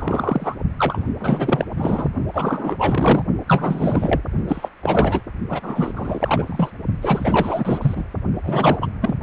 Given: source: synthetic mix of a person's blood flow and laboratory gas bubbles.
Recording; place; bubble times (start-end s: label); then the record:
Doppler ultrasound of blood flow; precordium
0.00-0.55 s: bubbles
0.78-1.05 s: bubbles
1.19-1.65 s: bubbles
1.77-2.10 s: bubbles
2.34-2.75 s: bubbles
2.78-3.25 s: bubbles
3.47-4.21 s: bubbles
4.47-4.69 s: bubbles
4.83-5.21 s: bubbles
5.49-5.92 s: bubbles
5.96-6.71 s: bubbles
7.01-8.04 s: bubbles
8.43-8.77 s: bubbles
8.80-8.88 s: bubbles
9.01-9.15 s: bubbles
From the record:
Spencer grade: 4 (maximum detectable bubble signal sounding continuously throughout systole and diastole of every cardiac period, and overriding the amplitude of the normal cardiac signals); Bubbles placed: only in the low amplitude regions of the cardiac cycle